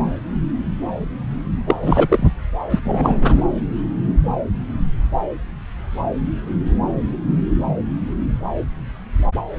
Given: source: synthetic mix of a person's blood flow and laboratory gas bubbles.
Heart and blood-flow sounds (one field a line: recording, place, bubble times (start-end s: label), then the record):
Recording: Doppler ultrasound of blood flow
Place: subclavian vein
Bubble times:
1.67-1.76 s: bubbles
1.82-2.27 s: bubbles
2.70-2.79 s: bubbles
2.83-3.44 s: bubbles
From the record:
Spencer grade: 2 (many but less than half of the cardiac periods contain bubble signals, singularly or in groups)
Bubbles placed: anywhere in the cardiac cycle